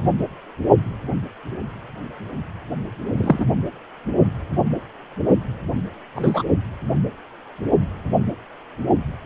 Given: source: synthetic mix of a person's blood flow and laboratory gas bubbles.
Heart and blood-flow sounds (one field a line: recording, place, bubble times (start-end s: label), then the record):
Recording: Doppler ultrasound of blood flow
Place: precordium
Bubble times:
3.17-3.46 s: bubbles
6.15-6.42 s: bubbles
From the record:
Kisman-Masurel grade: 123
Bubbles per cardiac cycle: 1 to 2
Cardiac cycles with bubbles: 10 to 50%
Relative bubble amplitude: loud (0.450 to 0.775)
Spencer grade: 2 (many but less than half of the cardiac periods contain bubble signals, singularly or in groups)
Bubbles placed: only in the low amplitude regions of the cardiac cycle